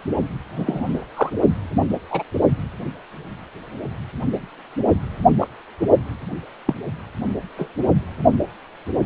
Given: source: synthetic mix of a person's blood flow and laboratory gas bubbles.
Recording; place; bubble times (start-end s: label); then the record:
Doppler ultrasound of blood flow; precordium
0.56-1.06 s: bubbles
1.17-1.30 s: bubbles
2.10-2.23 s: bubbles
5.40-5.47 s: bubbles
6.66-6.74 s: bubbles
7.58-7.67 s: bubbles
From the record:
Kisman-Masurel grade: 122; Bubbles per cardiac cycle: 1 to 2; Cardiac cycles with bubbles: 10 to 50%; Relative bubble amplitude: moderate (0.250 to 0.450); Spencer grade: 2 (many but less than half of the cardiac periods contain bubble signals, singularly or in groups); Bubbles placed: only in the low amplitude regions of the cardiac cycle